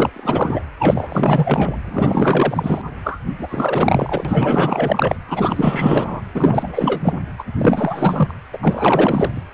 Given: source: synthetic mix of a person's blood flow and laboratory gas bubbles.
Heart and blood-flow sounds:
Doppler ultrasound of blood flow; precordium
0.00-0.10 s: bubbles
0.13-0.60 s: bubbles
0.79-1.76 s: bubbles
1.85-2.81 s: bubbles
3.04-3.21 s: bubbles
3.38-5.17 s: bubbles
5.27-6.21 s: bubbles
6.35-7.19 s: bubbles
7.38-7.44 s: bubbles
7.58-8.35 s: bubbles
8.53-8.58 s: bubbles
8.61-9.44 s: bubbles
From the record:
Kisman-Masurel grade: 444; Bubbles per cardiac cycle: continuous sound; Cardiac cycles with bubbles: 100%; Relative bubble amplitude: maximal (0.775 to 0.999); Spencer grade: 4 (maximum detectable bubble signal sounding continuously throughout systole and diastole of every cardiac period, and overriding the amplitude of the normal cardiac signals); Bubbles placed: anywhere in the cardiac cycle

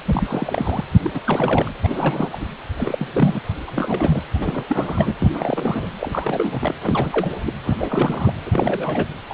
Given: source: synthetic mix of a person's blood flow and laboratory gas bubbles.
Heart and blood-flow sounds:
Doppler ultrasound of blood flow; precordium
0.05-0.84 s: bubbles
1.03-1.10 s: bubbles
1.14-1.22 s: bubbles
1.25-1.71 s: bubbles
1.83-2.37 s: bubbles
2.40-2.46 s: bubbles
2.77-3.07 s: bubbles
3.14-3.40 s: bubbles
3.68-4.21 s: bubbles
4.40-4.64 s: bubbles
4.70-5.16 s: bubbles
5.22-5.28 s: bubbles
5.34-5.88 s: bubbles
5.99-6.73 s: bubbles
6.84-7.40 s: bubbles
7.45-7.53 s: bubbles
7.64-7.74 s: bubbles
7.77-8.33 s: bubbles
8.46-9.06 s: bubbles
9.29-9.33 s: bubbles
From the record:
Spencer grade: 3 (all of the cardiac periods contain showers or single bubble signals, but not dominating or overriding the cardiac motion signals); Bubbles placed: anywhere in the cardiac cycle

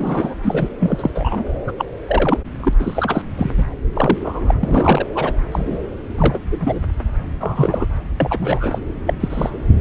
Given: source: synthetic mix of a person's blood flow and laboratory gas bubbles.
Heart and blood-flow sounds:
Doppler ultrasound of blood flow; subclavian vein
0.00-0.34 s: bubbles
0.42-0.69 s: bubbles
0.80-1.10 s: bubbles
1.15-1.43 s: bubbles
1.67-1.72 s: bubbles
1.78-1.85 s: bubbles
2.07-2.38 s: bubbles
2.60-2.73 s: bubbles
2.79-3.22 s: bubbles
3.37-3.50 s: bubbles
3.57-3.64 s: bubbles
3.94-4.19 s: bubbles
4.24-4.54 s: bubbles
4.60-5.07 s: bubbles
5.15-5.33 s: bubbles
5.51-5.79 s: bubbles
6.18-6.38 s: bubbles
6.51-6.79 s: bubbles
7.40-7.86 s: bubbles
8.20-8.79 s: bubbles
9.06-9.13 s: bubbles
9.20-9.50 s: bubbles
From the record:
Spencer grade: 3 (all of the cardiac periods contain showers or single bubble signals, but not dominating or overriding the cardiac motion signals); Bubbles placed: anywhere in the cardiac cycle

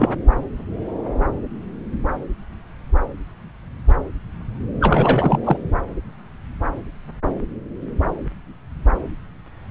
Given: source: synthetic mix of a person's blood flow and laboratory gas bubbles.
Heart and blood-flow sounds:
Doppler ultrasound of blood flow; subclavian vein
0.00-0.14 s: bubbles
4.80-5.39 s: bubbles
5.44-5.57 s: bubbles
From the record:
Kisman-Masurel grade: 222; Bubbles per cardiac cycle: several, 3 to 8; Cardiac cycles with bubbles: 10 to 50%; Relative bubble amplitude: moderate (0.250 to 0.450); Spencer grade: 2 (many but less than half of the cardiac periods contain bubble signals, singularly or in groups); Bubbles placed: anywhere in the cardiac cycle

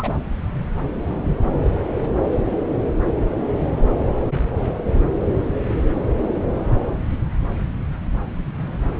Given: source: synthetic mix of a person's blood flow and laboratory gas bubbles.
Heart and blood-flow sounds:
Doppler ultrasound of blood flow; subclavian vein
0.00-0.16 s: bubbles
From the record:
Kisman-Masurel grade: 212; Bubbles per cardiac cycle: several, 3 to 8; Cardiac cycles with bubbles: 1 to 10%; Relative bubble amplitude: moderate (0.250 to 0.450); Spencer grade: 1 (occasional bubble signal discernible with the cardiac motion signal, with majority of cardiac periods free of bubbles); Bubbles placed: anywhere in the cardiac cycle

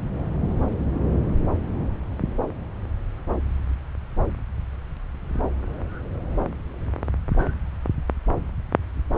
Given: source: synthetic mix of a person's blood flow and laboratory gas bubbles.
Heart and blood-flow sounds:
Doppler ultrasound of blood flow; subclavian vein
no bubbles
From the record:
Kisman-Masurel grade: 000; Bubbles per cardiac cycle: 0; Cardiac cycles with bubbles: 0%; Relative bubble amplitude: no bubbles discernible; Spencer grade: 0 (complete lack of bubble signals)

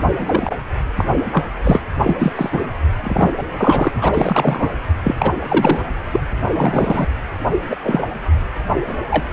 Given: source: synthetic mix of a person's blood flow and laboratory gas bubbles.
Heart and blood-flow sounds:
Doppler ultrasound of blood flow; precordium
0.18-0.56 s: bubbles
0.97-1.04 s: bubbles
1.32-1.44 s: bubbles
1.63-1.82 s: bubbles
2.04-2.33 s: bubbles
2.36-2.50 s: bubbles
2.52-2.66 s: bubbles
3.03-3.31 s: bubbles
3.37-3.47 s: bubbles
3.57-3.92 s: bubbles
3.98-4.72 s: bubbles
5.04-5.15 s: bubbles
5.19-5.34 s: bubbles
5.48-5.82 s: bubbles
6.12-6.20 s: bubbles
6.52-7.06 s: bubbles
7.70-7.77 s: bubbles
7.83-8.06 s: bubbles
8.88-8.94 s: bubbles
9.10-9.25 s: bubbles
From the record:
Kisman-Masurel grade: 233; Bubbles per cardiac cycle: several, 3 to 8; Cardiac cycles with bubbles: 50 to 99%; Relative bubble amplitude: loud (0.450 to 0.775); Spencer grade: 3 (all of the cardiac periods contain showers or single bubble signals, but not dominating or overriding the cardiac motion signals); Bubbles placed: anywhere in the cardiac cycle

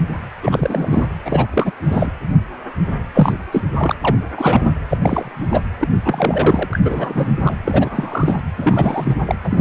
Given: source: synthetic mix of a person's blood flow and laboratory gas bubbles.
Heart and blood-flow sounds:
Doppler ultrasound of blood flow; precordium
0.42-1.07 s: bubbles
1.24-1.46 s: bubbles
1.50-1.71 s: bubbles
1.84-2.11 s: bubbles
3.14-3.33 s: bubbles
3.52-3.62 s: bubbles
3.78-3.95 s: bubbles
4.00-4.15 s: bubbles
4.37-4.73 s: bubbles
4.89-4.97 s: bubbles
5.01-5.62 s: bubbles
5.80-5.88 s: bubbles
6.04-6.79 s: bubbles
6.84-7.31 s: bubbles
7.42-7.55 s: bubbles
7.64-8.43 s: bubbles
8.57-9.15 s: bubbles
9.25-9.35 s: bubbles
9.45-9.61 s: bubbles
From the record:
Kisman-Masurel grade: 333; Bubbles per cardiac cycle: rolling drumbeat, 9 or more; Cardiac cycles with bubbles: 50 to 99%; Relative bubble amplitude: loud (0.450 to 0.775); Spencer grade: 3 (all of the cardiac periods contain showers or single bubble signals, but not dominating or overriding the cardiac motion signals); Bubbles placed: anywhere in the cardiac cycle

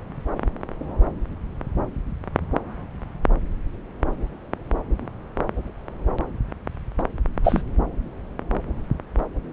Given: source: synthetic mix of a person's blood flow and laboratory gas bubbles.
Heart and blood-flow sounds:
Doppler ultrasound of blood flow; subclavian vein
6.98-7.03 s: bubbles
7.44-7.63 s: bubbles
From the record:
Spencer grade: 1 (occasional bubble signal discernible with the cardiac motion signal, with majority of cardiac periods free of bubbles); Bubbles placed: anywhere in the cardiac cycle

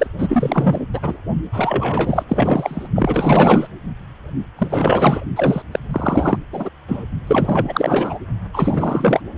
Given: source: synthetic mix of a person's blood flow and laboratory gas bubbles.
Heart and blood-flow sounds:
Doppler ultrasound of blood flow; precordium
0.00-0.07 s: bubbles
0.18-0.85 s: bubbles
0.94-1.18 s: bubbles
1.53-2.23 s: bubbles
2.29-2.89 s: bubbles
2.95-3.67 s: bubbles
4.56-5.21 s: bubbles
5.36-5.62 s: bubbles
5.71-5.79 s: bubbles
5.91-6.39 s: bubbles
6.52-6.70 s: bubbles
6.88-7.04 s: bubbles
7.27-8.19 s: bubbles
8.54-9.21 s: bubbles
From the record:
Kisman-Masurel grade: 444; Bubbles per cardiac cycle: continuous sound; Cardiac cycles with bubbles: 100%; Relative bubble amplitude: maximal (0.775 to 0.999); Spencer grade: 4 (maximum detectable bubble signal sounding continuously throughout systole and diastole of every cardiac period, and overriding the amplitude of the normal cardiac signals); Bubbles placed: only in the low amplitude regions of the cardiac cycle

